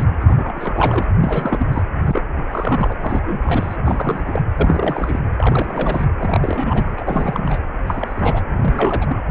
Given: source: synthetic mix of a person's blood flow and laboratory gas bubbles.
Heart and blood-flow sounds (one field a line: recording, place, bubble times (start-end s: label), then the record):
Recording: Doppler ultrasound of blood flow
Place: precordium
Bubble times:
0.00-0.04 s: bubbles
0.20-1.03 s: bubbles
1.20-1.65 s: bubbles
1.72-1.82 s: bubbles
2.05-2.25 s: bubbles
2.50-2.97 s: bubbles
3.00-3.22 s: bubbles
3.26-3.76 s: bubbles
3.85-4.42 s: bubbles
4.54-5.19 s: bubbles
5.34-6.05 s: bubbles
6.18-7.60 s: bubbles
7.86-8.44 s: bubbles
8.56-9.17 s: bubbles
From the record:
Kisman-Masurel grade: 332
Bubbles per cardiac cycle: rolling drumbeat, 9 or more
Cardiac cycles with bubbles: 50 to 99%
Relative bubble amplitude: moderate (0.250 to 0.450)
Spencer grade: 3 (all of the cardiac periods contain showers or single bubble signals, but not dominating or overriding the cardiac motion signals)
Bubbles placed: anywhere in the cardiac cycle